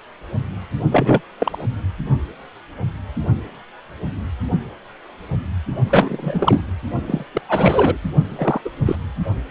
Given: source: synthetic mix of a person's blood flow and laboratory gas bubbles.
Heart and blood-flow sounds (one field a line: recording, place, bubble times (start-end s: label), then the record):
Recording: Doppler ultrasound of blood flow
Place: precordium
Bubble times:
0.91-1.21 s: bubbles
1.40-1.65 s: bubbles
5.87-6.61 s: bubbles
7.08-7.24 s: bubbles
7.35-7.42 s: bubbles
7.48-7.98 s: bubbles
8.29-8.61 s: bubbles
8.64-8.70 s: bubbles
8.85-8.96 s: bubbles
From the record:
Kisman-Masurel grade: 223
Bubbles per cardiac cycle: several, 3 to 8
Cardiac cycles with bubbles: 10 to 50%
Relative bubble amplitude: loud (0.450 to 0.775)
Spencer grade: 2 (many but less than half of the cardiac periods contain bubble signals, singularly or in groups)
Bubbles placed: only in the low amplitude regions of the cardiac cycle